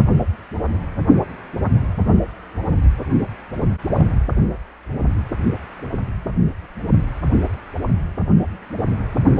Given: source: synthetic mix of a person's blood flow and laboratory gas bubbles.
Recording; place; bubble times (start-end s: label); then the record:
Doppler ultrasound of blood flow; precordium
3.96-4.07 s: bubbles
From the record:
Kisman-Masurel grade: 123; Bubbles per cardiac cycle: 1 to 2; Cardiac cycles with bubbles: 10 to 50%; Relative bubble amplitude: loud (0.450 to 0.775); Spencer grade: 2 (many but less than half of the cardiac periods contain bubble signals, singularly or in groups); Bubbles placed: only in the low amplitude regions of the cardiac cycle